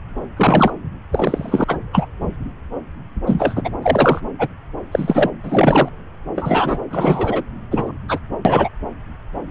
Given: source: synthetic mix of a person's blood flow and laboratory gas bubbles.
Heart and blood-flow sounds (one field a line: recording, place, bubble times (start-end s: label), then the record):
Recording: Doppler ultrasound of blood flow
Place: subclavian vein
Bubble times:
0.36-0.72 s: bubbles
1.12-1.64 s: bubbles
1.68-1.78 s: bubbles
1.92-2.06 s: bubbles
3.26-3.71 s: bubbles
3.82-4.21 s: bubbles
4.38-4.47 s: bubbles
4.91-5.30 s: bubbles
5.43-5.88 s: bubbles
6.35-6.79 s: bubbles
6.91-7.43 s: bubbles
7.71-7.92 s: bubbles
8.08-8.19 s: bubbles
8.45-8.69 s: bubbles
From the record:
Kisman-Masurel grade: 233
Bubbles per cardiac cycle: several, 3 to 8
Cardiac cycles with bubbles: 50 to 99%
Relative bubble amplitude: loud (0.450 to 0.775)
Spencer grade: 3 (all of the cardiac periods contain showers or single bubble signals, but not dominating or overriding the cardiac motion signals)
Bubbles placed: anywhere in the cardiac cycle